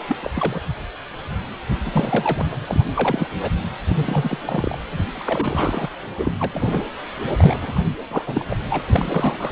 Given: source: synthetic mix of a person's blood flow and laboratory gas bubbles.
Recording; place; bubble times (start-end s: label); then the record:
Doppler ultrasound of blood flow; precordium
0.08-0.16 s: bubbles
0.21-0.30 s: bubbles
0.35-0.60 s: bubbles
1.85-2.46 s: bubbles
2.67-2.84 s: bubbles
2.94-3.28 s: bubbles
3.42-3.52 s: bubbles
3.88-4.78 s: bubbles
4.90-5.07 s: bubbles
5.13-5.89 s: bubbles
6.17-6.31 s: bubbles
6.38-6.84 s: bubbles
7.38-7.72 s: bubbles
7.76-7.81 s: bubbles
8.10-8.45 s: bubbles
8.48-8.56 s: bubbles
8.70-8.82 s: bubbles
8.86-9.51 s: bubbles
From the record:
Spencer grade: 3 (all of the cardiac periods contain showers or single bubble signals, but not dominating or overriding the cardiac motion signals); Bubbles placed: anywhere in the cardiac cycle